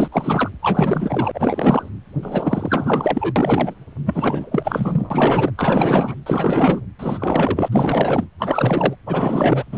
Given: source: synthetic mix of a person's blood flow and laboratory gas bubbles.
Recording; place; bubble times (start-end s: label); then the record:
Doppler ultrasound of blood flow; precordium
0.00-0.08 s: bubbles
0.11-0.50 s: bubbles
0.62-1.89 s: bubbles
2.22-3.33 s: bubbles
3.35-3.74 s: bubbles
4.05-5.51 s: bubbles
5.57-6.14 s: bubbles
6.26-6.82 s: bubbles
6.99-7.68 s: bubbles
7.72-8.29 s: bubbles
8.39-8.96 s: bubbles
9.06-9.64 s: bubbles
9.72-9.78 s: bubbles
From the record:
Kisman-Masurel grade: 444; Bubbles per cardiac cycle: continuous sound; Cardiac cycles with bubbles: 100%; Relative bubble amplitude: maximal (0.775 to 0.999); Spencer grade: 4 (maximum detectable bubble signal sounding continuously throughout systole and diastole of every cardiac period, and overriding the amplitude of the normal cardiac signals); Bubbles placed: anywhere in the cardiac cycle